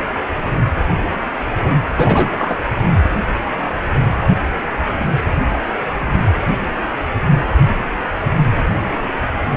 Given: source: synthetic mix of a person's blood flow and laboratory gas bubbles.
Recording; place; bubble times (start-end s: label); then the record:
Doppler ultrasound of blood flow; precordium
1.95-2.56 s: bubbles
From the record:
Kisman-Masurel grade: 212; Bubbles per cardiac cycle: several, 3 to 8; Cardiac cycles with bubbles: 1 to 10%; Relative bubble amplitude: moderate (0.250 to 0.450); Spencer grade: 1 (occasional bubble signal discernible with the cardiac motion signal, with majority of cardiac periods free of bubbles); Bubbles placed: only in the low amplitude regions of the cardiac cycle